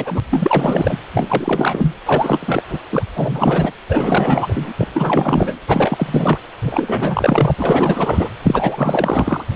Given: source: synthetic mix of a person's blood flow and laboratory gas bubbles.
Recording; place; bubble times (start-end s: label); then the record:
Doppler ultrasound of blood flow; precordium
0.00-0.20 s: bubbles
0.30-0.97 s: bubbles
1.14-1.94 s: bubbles
2.05-2.64 s: bubbles
2.69-2.80 s: bubbles
2.90-3.02 s: bubbles
3.14-3.72 s: bubbles
3.88-4.74 s: bubbles
4.78-4.88 s: bubbles
4.93-5.58 s: bubbles
5.67-6.38 s: bubbles
6.62-7.51 s: bubbles
7.58-8.29 s: bubbles
8.43-9.44 s: bubbles
9.53-9.56 s: bubbles
From the record:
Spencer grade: 4 (maximum detectable bubble signal sounding continuously throughout systole and diastole of every cardiac period, and overriding the amplitude of the normal cardiac signals); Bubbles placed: anywhere in the cardiac cycle